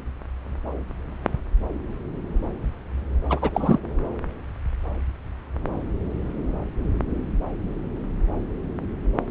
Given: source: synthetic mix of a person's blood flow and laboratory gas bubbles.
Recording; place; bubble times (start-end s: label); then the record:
Doppler ultrasound of blood flow; subclavian vein
3.29-3.50 s: bubbles
3.53-3.79 s: bubbles
From the record:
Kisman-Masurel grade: 213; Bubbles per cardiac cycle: several, 3 to 8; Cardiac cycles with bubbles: 1 to 10%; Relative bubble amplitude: loud (0.450 to 0.775); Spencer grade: 1 (occasional bubble signal discernible with the cardiac motion signal, with majority of cardiac periods free of bubbles); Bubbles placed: anywhere in the cardiac cycle